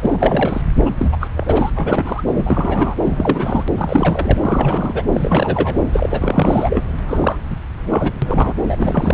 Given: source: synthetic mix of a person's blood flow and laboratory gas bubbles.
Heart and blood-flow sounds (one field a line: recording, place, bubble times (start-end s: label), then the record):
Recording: Doppler ultrasound of blood flow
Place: subclavian vein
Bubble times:
0.02-0.61 s: bubbles
0.85-0.90 s: bubbles
0.98-1.16 s: bubbles
1.20-1.28 s: bubbles
1.36-1.70 s: bubbles
1.75-2.22 s: bubbles
2.33-2.96 s: bubbles
3.02-3.65 s: bubbles
3.77-4.38 s: bubbles
4.42-5.03 s: bubbles
5.12-5.78 s: bubbles
5.92-6.82 s: bubbles
7.07-7.38 s: bubbles
7.50-7.56 s: bubbles
7.90-8.12 s: bubbles
8.22-8.53 s: bubbles
8.63-9.14 s: bubbles
From the record:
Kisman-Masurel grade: 342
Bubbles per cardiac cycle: rolling drumbeat, 9 or more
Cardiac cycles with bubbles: 100%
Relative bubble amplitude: moderate (0.250 to 0.450)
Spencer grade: 3 (all of the cardiac periods contain showers or single bubble signals, but not dominating or overriding the cardiac motion signals)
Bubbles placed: anywhere in the cardiac cycle